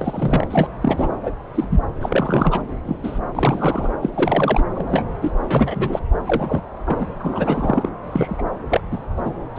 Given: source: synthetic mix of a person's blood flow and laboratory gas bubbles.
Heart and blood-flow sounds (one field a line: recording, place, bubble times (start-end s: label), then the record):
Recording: Doppler ultrasound of blood flow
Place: subclavian vein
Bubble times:
0.00-0.48 s: bubbles
0.50-0.68 s: bubbles
0.81-1.09 s: bubbles
1.23-1.31 s: bubbles
1.54-1.65 s: bubbles
1.70-1.83 s: bubbles
2.00-2.62 s: bubbles
2.85-2.96 s: bubbles
3.03-3.19 s: bubbles
3.35-3.90 s: bubbles
4.01-4.10 s: bubbles
4.14-4.63 s: bubbles
4.75-5.05 s: bubbles
5.21-5.31 s: bubbles
5.43-5.99 s: bubbles
6.26-6.61 s: bubbles
6.86-7.07 s: bubbles
7.19-7.90 s: bubbles
8.03-8.43 s: bubbles
8.69-8.80 s: bubbles
8.91-8.98 s: bubbles
9.16-9.21 s: bubbles
9.25-9.33 s: bubbles
9.55-9.59 s: bubbles
From the record:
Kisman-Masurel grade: 243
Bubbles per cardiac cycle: several, 3 to 8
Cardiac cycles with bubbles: 100%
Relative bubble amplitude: loud (0.450 to 0.775)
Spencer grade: 3 (all of the cardiac periods contain showers or single bubble signals, but not dominating or overriding the cardiac motion signals)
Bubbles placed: anywhere in the cardiac cycle